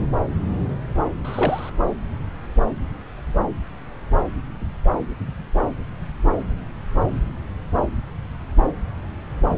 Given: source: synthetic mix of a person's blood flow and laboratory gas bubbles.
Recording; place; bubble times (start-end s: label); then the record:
Doppler ultrasound of blood flow; subclavian vein
1.24-1.70 s: bubbles
From the record:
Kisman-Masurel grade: 122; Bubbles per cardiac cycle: 1 to 2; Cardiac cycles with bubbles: 10 to 50%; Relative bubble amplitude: moderate (0.250 to 0.450); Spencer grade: 2 (many but less than half of the cardiac periods contain bubble signals, singularly or in groups); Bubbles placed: anywhere in the cardiac cycle